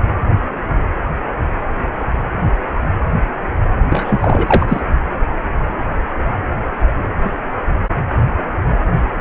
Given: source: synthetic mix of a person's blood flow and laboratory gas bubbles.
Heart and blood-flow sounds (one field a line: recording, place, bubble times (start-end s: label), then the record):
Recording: Doppler ultrasound of blood flow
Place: precordium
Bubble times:
3.89-4.81 s: bubbles
From the record:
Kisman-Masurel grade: 213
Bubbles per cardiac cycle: several, 3 to 8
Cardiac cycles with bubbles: 1 to 10%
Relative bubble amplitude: loud (0.450 to 0.775)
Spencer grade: 1 (occasional bubble signal discernible with the cardiac motion signal, with majority of cardiac periods free of bubbles)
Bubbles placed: only in the low amplitude regions of the cardiac cycle